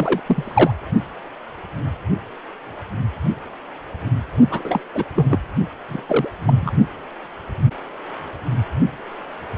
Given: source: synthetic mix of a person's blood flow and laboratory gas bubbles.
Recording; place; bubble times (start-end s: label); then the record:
Doppler ultrasound of blood flow; precordium
0.00-0.21 s: bubbles
0.26-0.76 s: bubbles
4.50-4.83 s: bubbles
4.94-5.04 s: bubbles
5.15-5.39 s: bubbles
5.88-6.03 s: bubbles
6.08-6.29 s: bubbles
6.45-6.71 s: bubbles
From the record:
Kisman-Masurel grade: 232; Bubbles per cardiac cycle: several, 3 to 8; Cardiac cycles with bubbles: 50 to 99%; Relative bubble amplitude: moderate (0.250 to 0.450); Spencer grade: 3 (all of the cardiac periods contain showers or single bubble signals, but not dominating or overriding the cardiac motion signals); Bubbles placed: only in the low amplitude regions of the cardiac cycle